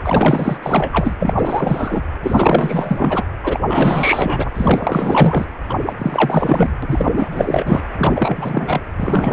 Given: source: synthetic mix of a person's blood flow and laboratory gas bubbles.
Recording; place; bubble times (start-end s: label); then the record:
Doppler ultrasound of blood flow; precordium
0.04-0.58 s: bubbles
0.62-1.13 s: bubbles
1.19-1.34 s: bubbles
1.38-2.02 s: bubbles
2.23-3.23 s: bubbles
3.43-3.59 s: bubbles
3.68-4.50 s: bubbles
4.55-5.47 s: bubbles
5.69-5.75 s: bubbles
5.86-5.95 s: bubbles
5.98-6.72 s: bubbles
6.82-7.29 s: bubbles
7.32-7.81 s: bubbles
7.97-8.80 s: bubbles
8.98-9.33 s: bubbles
From the record:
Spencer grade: 4 (maximum detectable bubble signal sounding continuously throughout systole and diastole of every cardiac period, and overriding the amplitude of the normal cardiac signals); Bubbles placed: anywhere in the cardiac cycle